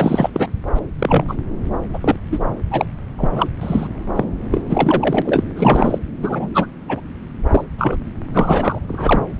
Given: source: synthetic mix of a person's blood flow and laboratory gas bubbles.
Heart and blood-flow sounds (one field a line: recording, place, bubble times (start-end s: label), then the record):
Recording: Doppler ultrasound of blood flow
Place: subclavian vein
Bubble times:
0.00-0.30 s: bubbles
0.33-0.48 s: bubbles
0.74-0.79 s: bubbles
0.98-1.24 s: bubbles
1.28-1.36 s: bubbles
1.93-2.16 s: bubbles
2.31-2.38 s: bubbles
2.71-2.86 s: bubbles
3.17-3.50 s: bubbles
3.61-3.87 s: bubbles
4.16-4.24 s: bubbles
4.51-4.63 s: bubbles
4.69-5.22 s: bubbles
5.25-5.43 s: bubbles
5.55-5.99 s: bubbles
6.21-6.50 s: bubbles
6.54-6.67 s: bubbles
6.88-7.00 s: bubbles
7.50-7.64 s: bubbles
7.78-7.96 s: bubbles
8.33-8.79 s: bubbles
8.88-9.22 s: bubbles
From the record:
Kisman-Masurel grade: 243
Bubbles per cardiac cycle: several, 3 to 8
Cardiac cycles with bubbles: 100%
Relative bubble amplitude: loud (0.450 to 0.775)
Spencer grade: 3 (all of the cardiac periods contain showers or single bubble signals, but not dominating or overriding the cardiac motion signals)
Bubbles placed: anywhere in the cardiac cycle